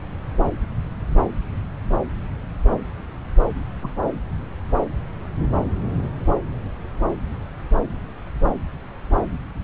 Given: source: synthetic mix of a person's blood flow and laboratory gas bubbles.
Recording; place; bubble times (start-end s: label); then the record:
Doppler ultrasound of blood flow; subclavian vein
3.83-3.89 s: bubbles
From the record:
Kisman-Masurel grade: 111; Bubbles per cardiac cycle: 1 to 2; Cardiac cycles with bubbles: 1 to 10%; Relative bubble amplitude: barely perceptible (0.100 to 0.250); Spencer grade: 1 (occasional bubble signal discernible with the cardiac motion signal, with majority of cardiac periods free of bubbles); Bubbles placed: anywhere in the cardiac cycle